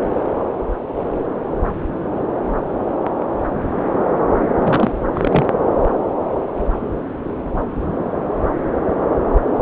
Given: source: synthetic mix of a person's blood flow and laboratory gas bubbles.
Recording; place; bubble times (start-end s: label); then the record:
Doppler ultrasound of blood flow; subclavian vein
4.56-4.91 s: bubbles
5.15-5.46 s: bubbles
From the record:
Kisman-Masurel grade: 212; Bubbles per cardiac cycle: several, 3 to 8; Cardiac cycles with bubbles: 1 to 10%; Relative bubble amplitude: moderate (0.250 to 0.450); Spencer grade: 1 (occasional bubble signal discernible with the cardiac motion signal, with majority of cardiac periods free of bubbles); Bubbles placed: anywhere in the cardiac cycle